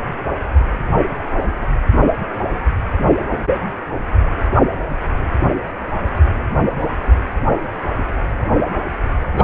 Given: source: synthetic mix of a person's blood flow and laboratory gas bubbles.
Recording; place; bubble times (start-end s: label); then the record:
Doppler ultrasound of blood flow; precordium
9.35-9.44 s: bubbles
From the record:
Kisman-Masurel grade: 113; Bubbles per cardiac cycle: 1 to 2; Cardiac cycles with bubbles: 1 to 10%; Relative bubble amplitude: loud (0.450 to 0.775); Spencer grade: 1 (occasional bubble signal discernible with the cardiac motion signal, with majority of cardiac periods free of bubbles); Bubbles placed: only in the low amplitude regions of the cardiac cycle